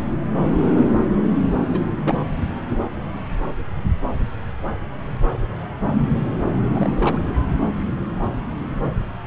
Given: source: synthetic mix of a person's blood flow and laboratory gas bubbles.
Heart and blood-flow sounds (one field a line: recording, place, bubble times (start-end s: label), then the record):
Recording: Doppler ultrasound of blood flow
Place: subclavian vein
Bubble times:
1.72-1.90 s: bubbles
2.04-2.23 s: bubbles
6.74-6.89 s: bubbles
6.97-7.34 s: bubbles
From the record:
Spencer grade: 2 (many but less than half of the cardiac periods contain bubble signals, singularly or in groups)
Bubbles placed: anywhere in the cardiac cycle